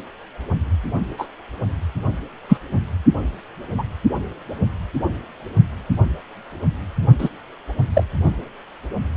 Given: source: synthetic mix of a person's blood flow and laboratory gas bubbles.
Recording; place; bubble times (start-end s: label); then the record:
Doppler ultrasound of blood flow; precordium
1.18-1.27 s: bubbles
2.48-2.58 s: bubbles
3.77-3.83 s: bubbles
7.18-7.29 s: bubbles
7.93-8.04 s: bubbles
From the record:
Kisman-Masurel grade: 123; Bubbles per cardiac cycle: 1 to 2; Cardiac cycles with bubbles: 10 to 50%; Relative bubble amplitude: loud (0.450 to 0.775); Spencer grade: 2 (many but less than half of the cardiac periods contain bubble signals, singularly or in groups); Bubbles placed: only in the low amplitude regions of the cardiac cycle